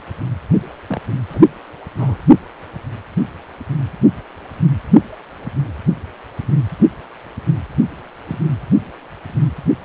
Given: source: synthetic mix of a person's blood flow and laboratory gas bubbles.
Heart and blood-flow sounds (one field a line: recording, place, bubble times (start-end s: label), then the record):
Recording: Doppler ultrasound of blood flow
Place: precordium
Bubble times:
0.88-1.00 s: bubbles
1.29-1.41 s: bubbles
1.99-2.22 s: bubbles
8.27-8.39 s: bubbles
From the record:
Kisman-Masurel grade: 121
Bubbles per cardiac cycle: 1 to 2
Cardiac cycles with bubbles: 10 to 50%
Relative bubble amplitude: barely perceptible (0.100 to 0.250)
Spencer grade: 2 (many but less than half of the cardiac periods contain bubble signals, singularly or in groups)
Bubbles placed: only in the low amplitude regions of the cardiac cycle